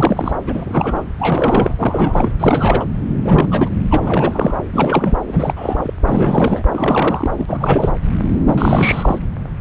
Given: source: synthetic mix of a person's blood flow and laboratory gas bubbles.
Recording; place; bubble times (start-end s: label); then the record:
Doppler ultrasound of blood flow; subclavian vein
0.00-0.38 s: bubbles
0.47-1.03 s: bubbles
1.19-1.74 s: bubbles
1.79-2.32 s: bubbles
2.39-2.85 s: bubbles
3.25-3.46 s: bubbles
3.50-3.69 s: bubbles
3.89-4.57 s: bubbles
4.71-5.17 s: bubbles
5.28-5.54 s: bubbles
5.56-5.92 s: bubbles
6.05-6.62 s: bubbles
6.72-7.90 s: bubbles
8.46-9.19 s: bubbles
From the record:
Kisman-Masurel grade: 332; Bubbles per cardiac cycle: rolling drumbeat, 9 or more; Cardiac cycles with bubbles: 50 to 99%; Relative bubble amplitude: moderate (0.250 to 0.450); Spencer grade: 3 (all of the cardiac periods contain showers or single bubble signals, but not dominating or overriding the cardiac motion signals); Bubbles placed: anywhere in the cardiac cycle